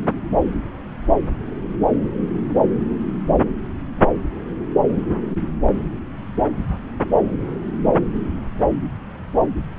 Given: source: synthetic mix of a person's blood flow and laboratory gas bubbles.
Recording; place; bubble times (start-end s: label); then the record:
Doppler ultrasound of blood flow; subclavian vein
no bubbles
From the record:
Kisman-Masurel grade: 000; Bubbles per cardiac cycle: 0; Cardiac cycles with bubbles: 0%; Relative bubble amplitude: no bubbles discernible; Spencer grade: 0 (complete lack of bubble signals)